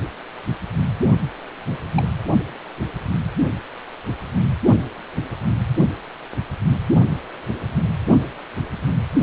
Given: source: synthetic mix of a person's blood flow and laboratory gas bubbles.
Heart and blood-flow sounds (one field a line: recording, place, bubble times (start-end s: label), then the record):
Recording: Doppler ultrasound of blood flow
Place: precordium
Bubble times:
1.70-1.77 s: bubbles
1.97-2.08 s: bubbles
From the record:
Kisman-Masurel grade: 112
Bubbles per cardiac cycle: 1 to 2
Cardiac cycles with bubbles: 1 to 10%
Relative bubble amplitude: moderate (0.250 to 0.450)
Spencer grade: 1 (occasional bubble signal discernible with the cardiac motion signal, with majority of cardiac periods free of bubbles)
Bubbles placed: only in the low amplitude regions of the cardiac cycle